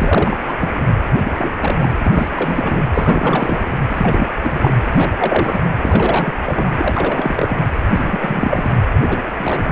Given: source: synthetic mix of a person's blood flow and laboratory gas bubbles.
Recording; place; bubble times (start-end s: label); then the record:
Doppler ultrasound of blood flow; precordium
0.00-0.39 s: bubbles
0.44-0.55 s: bubbles
0.61-0.69 s: bubbles
0.74-0.81 s: bubbles
1.24-1.52 s: bubbles
1.60-1.91 s: bubbles
2.01-2.83 s: bubbles
2.93-3.79 s: bubbles
3.89-4.29 s: bubbles
4.43-4.72 s: bubbles
4.85-5.59 s: bubbles
5.82-6.33 s: bubbles
6.46-6.70 s: bubbles
6.77-7.57 s: bubbles
7.94-8.71 s: bubbles
9.08-9.21 s: bubbles
9.37-9.72 s: bubbles
From the record:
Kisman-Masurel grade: 342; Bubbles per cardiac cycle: rolling drumbeat, 9 or more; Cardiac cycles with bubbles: 100%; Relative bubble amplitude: moderate (0.250 to 0.450); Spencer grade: 3 (all of the cardiac periods contain showers or single bubble signals, but not dominating or overriding the cardiac motion signals); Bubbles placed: anywhere in the cardiac cycle